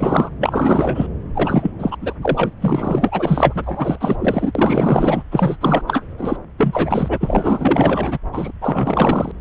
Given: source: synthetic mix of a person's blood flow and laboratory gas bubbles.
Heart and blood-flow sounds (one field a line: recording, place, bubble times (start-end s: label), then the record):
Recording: Doppler ultrasound of blood flow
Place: subclavian vein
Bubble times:
0.00-0.30 s: bubbles
0.40-1.07 s: bubbles
1.34-1.71 s: bubbles
1.78-1.97 s: bubbles
2.01-2.14 s: bubbles
2.22-2.52 s: bubbles
2.60-3.98 s: bubbles
4.00-4.17 s: bubbles
4.19-4.52 s: bubbles
4.55-5.24 s: bubbles
5.31-5.57 s: bubbles
5.61-5.83 s: bubbles
5.87-6.04 s: bubbles
6.18-6.37 s: bubbles
6.58-8.19 s: bubbles
8.32-8.52 s: bubbles
8.61-9.31 s: bubbles
From the record:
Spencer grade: 4 (maximum detectable bubble signal sounding continuously throughout systole and diastole of every cardiac period, and overriding the amplitude of the normal cardiac signals)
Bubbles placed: anywhere in the cardiac cycle